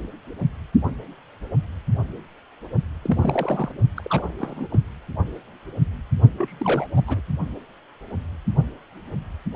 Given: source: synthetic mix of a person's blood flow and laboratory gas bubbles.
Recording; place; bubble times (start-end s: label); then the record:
Doppler ultrasound of blood flow; precordium
3.02-3.71 s: bubbles
3.97-4.31 s: bubbles
4.38-4.67 s: bubbles
4.71-4.79 s: bubbles
6.38-6.88 s: bubbles
6.96-7.21 s: bubbles
From the record:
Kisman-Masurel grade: 221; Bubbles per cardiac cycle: several, 3 to 8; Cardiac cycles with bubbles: 10 to 50%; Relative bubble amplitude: barely perceptible (0.100 to 0.250); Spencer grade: 2 (many but less than half of the cardiac periods contain bubble signals, singularly or in groups); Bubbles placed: only in the low amplitude regions of the cardiac cycle